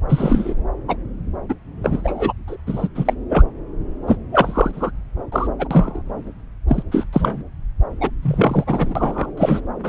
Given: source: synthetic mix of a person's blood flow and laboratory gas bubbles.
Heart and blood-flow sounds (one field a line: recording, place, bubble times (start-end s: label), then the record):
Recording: Doppler ultrasound of blood flow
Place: subclavian vein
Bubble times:
0.08-0.54 s: bubbles
0.88-0.95 s: bubbles
1.49-1.53 s: bubbles
1.83-2.33 s: bubbles
2.48-2.56 s: bubbles
2.67-2.88 s: bubbles
2.95-3.13 s: bubbles
3.29-3.44 s: bubbles
4.07-4.17 s: bubbles
4.31-4.91 s: bubbles
5.32-5.47 s: bubbles
5.58-5.68 s: bubbles
5.71-6.02 s: bubbles
6.67-6.83 s: bubbles
6.91-7.05 s: bubbles
7.12-7.43 s: bubbles
8.01-8.10 s: bubbles
8.22-9.31 s: bubbles
9.37-9.60 s: bubbles
9.84-9.89 s: bubbles
From the record:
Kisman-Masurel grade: 233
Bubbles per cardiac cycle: several, 3 to 8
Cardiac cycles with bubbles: 50 to 99%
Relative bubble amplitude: loud (0.450 to 0.775)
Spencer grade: 3 (all of the cardiac periods contain showers or single bubble signals, but not dominating or overriding the cardiac motion signals)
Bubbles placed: anywhere in the cardiac cycle